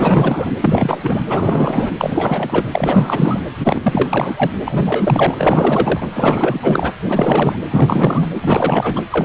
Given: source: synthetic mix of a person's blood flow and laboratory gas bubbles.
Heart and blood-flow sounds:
Doppler ultrasound of blood flow; precordium
0.00-0.52 s: bubbles
0.61-1.23 s: bubbles
1.29-1.92 s: bubbles
1.98-2.65 s: bubbles
2.71-3.40 s: bubbles
3.63-4.51 s: bubbles
4.67-6.08 s: bubbles
6.15-6.93 s: bubbles
7.08-7.60 s: bubbles
7.70-8.28 s: bubbles
8.35-9.03 s: bubbles
9.10-9.25 s: bubbles
From the record:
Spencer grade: 4 (maximum detectable bubble signal sounding continuously throughout systole and diastole of every cardiac period, and overriding the amplitude of the normal cardiac signals); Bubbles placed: anywhere in the cardiac cycle

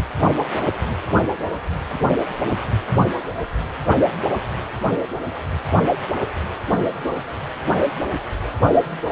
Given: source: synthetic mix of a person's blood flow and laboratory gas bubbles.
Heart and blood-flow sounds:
Doppler ultrasound of blood flow; precordium
no bubbles
From the record:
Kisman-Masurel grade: 000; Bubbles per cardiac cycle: 0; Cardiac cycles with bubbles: 0%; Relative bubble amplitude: no bubbles discernible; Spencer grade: 0 (complete lack of bubble signals)

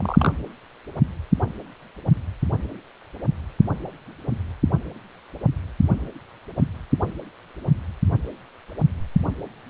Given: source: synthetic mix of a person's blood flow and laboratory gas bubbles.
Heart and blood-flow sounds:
Doppler ultrasound of blood flow; precordium
0.00-0.33 s: bubbles
From the record:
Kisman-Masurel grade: 113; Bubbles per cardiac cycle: 1 to 2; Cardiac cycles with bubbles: 1 to 10%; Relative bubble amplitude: loud (0.450 to 0.775); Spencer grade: 1 (occasional bubble signal discernible with the cardiac motion signal, with majority of cardiac periods free of bubbles); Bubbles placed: anywhere in the cardiac cycle

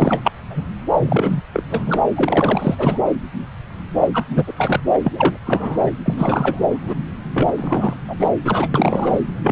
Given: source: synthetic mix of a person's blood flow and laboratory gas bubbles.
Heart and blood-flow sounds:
Doppler ultrasound of blood flow; subclavian vein
0.00-0.32 s: bubbles
0.49-0.62 s: bubbles
0.96-1.41 s: bubbles
1.53-1.64 s: bubbles
1.69-1.99 s: bubbles
2.15-2.75 s: bubbles
2.78-2.99 s: bubbles
4.00-4.08 s: bubbles
4.13-4.25 s: bubbles
4.30-4.44 s: bubbles
4.47-4.53 s: bubbles
4.57-4.80 s: bubbles
4.92-5.00 s: bubbles
5.04-5.38 s: bubbles
5.46-5.91 s: bubbles
6.05-6.65 s: bubbles
6.70-6.95 s: bubbles
7.33-7.52 s: bubbles
7.57-7.95 s: bubbles
8.07-8.15 s: bubbles
8.20-8.29 s: bubbles
8.45-8.69 s: bubbles
8.74-9.22 s: bubbles
9.43-9.52 s: bubbles
From the record:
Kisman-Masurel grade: 333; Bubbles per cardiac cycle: rolling drumbeat, 9 or more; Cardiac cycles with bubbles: 50 to 99%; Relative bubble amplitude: loud (0.450 to 0.775); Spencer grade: 3 (all of the cardiac periods contain showers or single bubble signals, but not dominating or overriding the cardiac motion signals); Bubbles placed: anywhere in the cardiac cycle

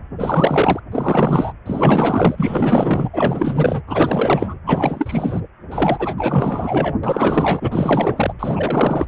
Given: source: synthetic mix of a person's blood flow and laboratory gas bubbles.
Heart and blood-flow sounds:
Doppler ultrasound of blood flow; precordium
0.18-0.80 s: bubbles
0.92-1.53 s: bubbles
1.66-3.10 s: bubbles
3.12-3.82 s: bubbles
3.87-4.58 s: bubbles
4.66-5.40 s: bubbles
5.71-6.95 s: bubbles
7.03-8.34 s: bubbles
8.39-9.06 s: bubbles
From the record:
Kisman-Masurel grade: 444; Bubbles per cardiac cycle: continuous sound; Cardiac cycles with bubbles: 100%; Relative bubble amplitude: maximal (0.775 to 0.999); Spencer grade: 4 (maximum detectable bubble signal sounding continuously throughout systole and diastole of every cardiac period, and overriding the amplitude of the normal cardiac signals); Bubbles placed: anywhere in the cardiac cycle

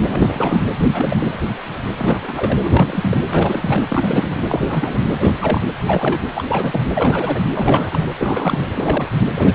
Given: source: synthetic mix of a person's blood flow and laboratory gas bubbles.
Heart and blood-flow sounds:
Doppler ultrasound of blood flow; precordium
0.09-0.61 s: bubbles
0.93-1.40 s: bubbles
1.98-3.17 s: bubbles
3.26-3.82 s: bubbles
3.88-4.42 s: bubbles
4.48-5.36 s: bubbles
5.40-5.61 s: bubbles
5.74-6.28 s: bubbles
6.35-6.45 s: bubbles
6.48-6.81 s: bubbles
6.94-7.44 s: bubbles
7.54-8.06 s: bubbles
8.19-8.70 s: bubbles
8.76-9.27 s: bubbles
9.35-9.55 s: bubbles
From the record:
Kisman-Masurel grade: 332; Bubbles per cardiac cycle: rolling drumbeat, 9 or more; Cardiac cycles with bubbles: 50 to 99%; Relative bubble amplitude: moderate (0.250 to 0.450); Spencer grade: 3 (all of the cardiac periods contain showers or single bubble signals, but not dominating or overriding the cardiac motion signals); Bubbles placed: anywhere in the cardiac cycle

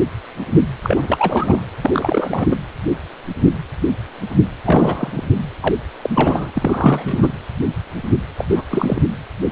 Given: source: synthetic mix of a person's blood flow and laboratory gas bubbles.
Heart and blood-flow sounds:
Doppler ultrasound of blood flow; precordium
0.82-1.60 s: bubbles
1.81-2.56 s: bubbles
4.65-5.21 s: bubbles
5.62-5.75 s: bubbles
6.03-6.10 s: bubbles
6.13-7.28 s: bubbles
8.37-8.45 s: bubbles
8.50-8.63 s: bubbles
8.70-9.02 s: bubbles
From the record:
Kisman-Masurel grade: 332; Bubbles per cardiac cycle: rolling drumbeat, 9 or more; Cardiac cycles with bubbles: 50 to 99%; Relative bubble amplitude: moderate (0.250 to 0.450); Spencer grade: 3 (all of the cardiac periods contain showers or single bubble signals, but not dominating or overriding the cardiac motion signals); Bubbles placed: anywhere in the cardiac cycle

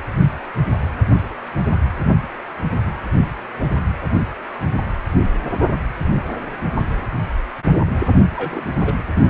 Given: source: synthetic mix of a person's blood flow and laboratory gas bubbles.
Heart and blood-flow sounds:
Doppler ultrasound of blood flow; precordium
8.36-8.68 s: bubbles
8.85-8.95 s: bubbles
From the record:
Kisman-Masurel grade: 211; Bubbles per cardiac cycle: several, 3 to 8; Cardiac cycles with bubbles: 1 to 10%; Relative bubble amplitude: barely perceptible (0.100 to 0.250); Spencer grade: 1 (occasional bubble signal discernible with the cardiac motion signal, with majority of cardiac periods free of bubbles); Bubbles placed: anywhere in the cardiac cycle

